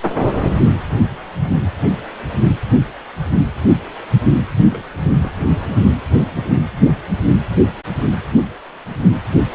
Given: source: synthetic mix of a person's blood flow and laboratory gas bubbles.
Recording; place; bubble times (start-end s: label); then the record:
Doppler ultrasound of blood flow; precordium
4.68-4.84 s: bubbles
5.16-5.31 s: bubbles
5.39-5.46 s: bubbles
5.60-5.76 s: bubbles
From the record:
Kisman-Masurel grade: 211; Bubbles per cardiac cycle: several, 3 to 8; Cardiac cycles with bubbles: 1 to 10%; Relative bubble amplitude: barely perceptible (0.100 to 0.250); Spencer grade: 1 (occasional bubble signal discernible with the cardiac motion signal, with majority of cardiac periods free of bubbles); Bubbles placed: only in the low amplitude regions of the cardiac cycle